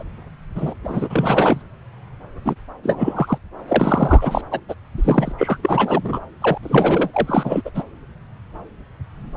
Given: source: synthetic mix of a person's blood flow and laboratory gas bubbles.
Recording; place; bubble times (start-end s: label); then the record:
Doppler ultrasound of blood flow; subclavian vein
0.00-0.03 s: bubbles
0.56-0.73 s: bubbles
0.84-1.62 s: bubbles
2.44-2.55 s: bubbles
2.83-3.38 s: bubbles
3.68-4.42 s: bubbles
4.51-4.60 s: bubbles
4.69-4.75 s: bubbles
4.98-5.32 s: bubbles
5.38-5.57 s: bubbles
5.62-6.20 s: bubbles
6.41-6.58 s: bubbles
6.62-7.10 s: bubbles
7.14-7.62 s: bubbles
7.65-7.71 s: bubbles
7.75-7.83 s: bubbles
From the record:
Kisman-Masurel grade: 333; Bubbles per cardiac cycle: rolling drumbeat, 9 or more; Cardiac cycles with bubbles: 50 to 99%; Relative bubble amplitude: loud (0.450 to 0.775); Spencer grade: 3 (all of the cardiac periods contain showers or single bubble signals, but not dominating or overriding the cardiac motion signals); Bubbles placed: anywhere in the cardiac cycle